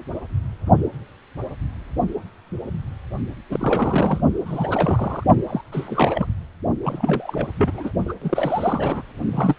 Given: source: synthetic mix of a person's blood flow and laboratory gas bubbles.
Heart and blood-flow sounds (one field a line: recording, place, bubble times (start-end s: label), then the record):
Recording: Doppler ultrasound of blood flow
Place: precordium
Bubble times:
3.49-4.21 s: bubbles
4.46-5.24 s: bubbles
5.48-5.62 s: bubbles
5.72-6.27 s: bubbles
6.83-7.47 s: bubbles
7.58-7.92 s: bubbles
8.05-8.13 s: bubbles
8.21-9.02 s: bubbles
9.32-9.55 s: bubbles
From the record:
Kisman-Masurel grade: 332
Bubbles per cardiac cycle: rolling drumbeat, 9 or more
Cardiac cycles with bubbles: 50 to 99%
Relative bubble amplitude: moderate (0.250 to 0.450)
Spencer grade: 3 (all of the cardiac periods contain showers or single bubble signals, but not dominating or overriding the cardiac motion signals)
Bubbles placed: only in the low amplitude regions of the cardiac cycle